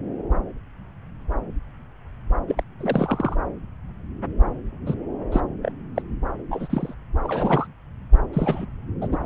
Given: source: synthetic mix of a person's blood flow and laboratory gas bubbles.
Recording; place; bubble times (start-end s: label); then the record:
Doppler ultrasound of blood flow; subclavian vein
2.47-2.64 s: bubbles
2.80-3.36 s: bubbles
4.86-4.94 s: bubbles
5.32-5.40 s: bubbles
5.62-5.72 s: bubbles
5.96-6.02 s: bubbles
6.51-6.94 s: bubbles
7.23-7.67 s: bubbles
8.33-8.65 s: bubbles
9.01-9.08 s: bubbles
9.12-9.17 s: bubbles
From the record:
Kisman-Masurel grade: 232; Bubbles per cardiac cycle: several, 3 to 8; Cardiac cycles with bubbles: 50 to 99%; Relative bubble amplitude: moderate (0.250 to 0.450); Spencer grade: 3 (all of the cardiac periods contain showers or single bubble signals, but not dominating or overriding the cardiac motion signals); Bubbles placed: anywhere in the cardiac cycle